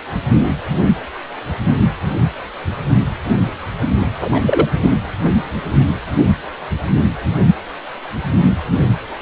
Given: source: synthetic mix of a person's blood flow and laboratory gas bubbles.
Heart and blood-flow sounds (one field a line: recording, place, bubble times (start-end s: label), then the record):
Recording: Doppler ultrasound of blood flow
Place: precordium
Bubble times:
4.25-4.41 s: bubbles
4.46-4.68 s: bubbles
4.74-4.91 s: bubbles
From the record:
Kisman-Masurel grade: 213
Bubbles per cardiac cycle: several, 3 to 8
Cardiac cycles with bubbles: 1 to 10%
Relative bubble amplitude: loud (0.450 to 0.775)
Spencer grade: 1 (occasional bubble signal discernible with the cardiac motion signal, with majority of cardiac periods free of bubbles)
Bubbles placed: only in the low amplitude regions of the cardiac cycle